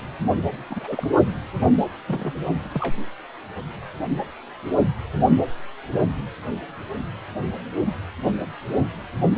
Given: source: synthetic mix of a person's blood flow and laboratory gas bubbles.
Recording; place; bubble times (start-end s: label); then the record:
Doppler ultrasound of blood flow; precordium
0.69-1.07 s: bubbles
2.07-2.35 s: bubbles
2.74-2.96 s: bubbles
From the record:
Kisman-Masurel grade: 121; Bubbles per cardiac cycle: 1 to 2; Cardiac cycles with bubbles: 10 to 50%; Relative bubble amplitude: barely perceptible (0.100 to 0.250); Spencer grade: 2 (many but less than half of the cardiac periods contain bubble signals, singularly or in groups); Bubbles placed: anywhere in the cardiac cycle